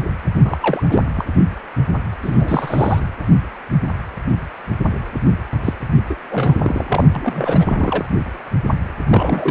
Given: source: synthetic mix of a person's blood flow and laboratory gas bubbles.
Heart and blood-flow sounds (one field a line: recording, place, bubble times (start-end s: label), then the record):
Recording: Doppler ultrasound of blood flow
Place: precordium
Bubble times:
0.34-0.58 s: bubbles
0.60-0.83 s: bubbles
0.89-1.02 s: bubbles
1.15-1.25 s: bubbles
2.23-3.00 s: bubbles
5.63-5.73 s: bubbles
6.09-6.14 s: bubbles
6.29-7.04 s: bubbles
7.15-8.05 s: bubbles
9.09-9.51 s: bubbles
From the record:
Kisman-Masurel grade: 332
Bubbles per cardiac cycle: rolling drumbeat, 9 or more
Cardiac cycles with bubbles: 50 to 99%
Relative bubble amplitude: moderate (0.250 to 0.450)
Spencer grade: 3 (all of the cardiac periods contain showers or single bubble signals, but not dominating or overriding the cardiac motion signals)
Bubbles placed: anywhere in the cardiac cycle